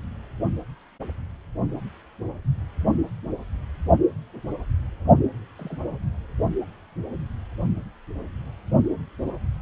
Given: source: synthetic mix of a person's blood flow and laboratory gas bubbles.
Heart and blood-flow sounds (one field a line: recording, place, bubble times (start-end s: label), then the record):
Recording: Doppler ultrasound of blood flow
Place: precordium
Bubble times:
5.58-5.77 s: bubbles
From the record:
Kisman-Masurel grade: 111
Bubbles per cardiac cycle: 1 to 2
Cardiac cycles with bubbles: 1 to 10%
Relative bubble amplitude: barely perceptible (0.100 to 0.250)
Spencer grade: 1 (occasional bubble signal discernible with the cardiac motion signal, with majority of cardiac periods free of bubbles)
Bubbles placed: anywhere in the cardiac cycle